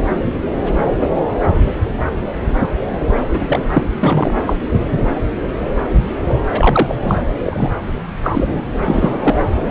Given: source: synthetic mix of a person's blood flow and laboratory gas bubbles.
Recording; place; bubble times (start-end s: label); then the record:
Doppler ultrasound of blood flow; subclavian vein
3.28-3.87 s: bubbles
4.00-4.31 s: bubbles
4.46-4.57 s: bubbles
6.52-7.17 s: bubbles
7.44-7.70 s: bubbles
8.22-8.62 s: bubbles
8.84-9.35 s: bubbles
From the record:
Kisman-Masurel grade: 233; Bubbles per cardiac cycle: several, 3 to 8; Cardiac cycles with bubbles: 50 to 99%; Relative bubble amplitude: loud (0.450 to 0.775); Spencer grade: 3 (all of the cardiac periods contain showers or single bubble signals, but not dominating or overriding the cardiac motion signals); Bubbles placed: anywhere in the cardiac cycle